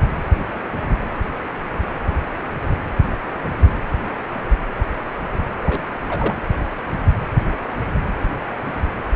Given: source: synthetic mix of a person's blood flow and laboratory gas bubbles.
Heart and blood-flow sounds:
Doppler ultrasound of blood flow; precordium
5.64-5.83 s: bubbles
6.08-6.35 s: bubbles
From the record:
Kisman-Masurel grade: 211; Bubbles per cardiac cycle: several, 3 to 8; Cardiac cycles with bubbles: 1 to 10%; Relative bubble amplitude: barely perceptible (0.100 to 0.250); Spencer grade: 1 (occasional bubble signal discernible with the cardiac motion signal, with majority of cardiac periods free of bubbles); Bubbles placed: anywhere in the cardiac cycle

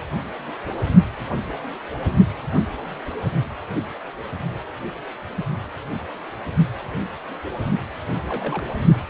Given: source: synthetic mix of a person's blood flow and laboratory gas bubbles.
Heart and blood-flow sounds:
Doppler ultrasound of blood flow; precordium
8.29-8.63 s: bubbles
From the record:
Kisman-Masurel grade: 111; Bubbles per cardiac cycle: 1 to 2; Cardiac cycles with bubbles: 1 to 10%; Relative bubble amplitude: barely perceptible (0.100 to 0.250); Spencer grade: 1 (occasional bubble signal discernible with the cardiac motion signal, with majority of cardiac periods free of bubbles); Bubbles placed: only in the low amplitude regions of the cardiac cycle

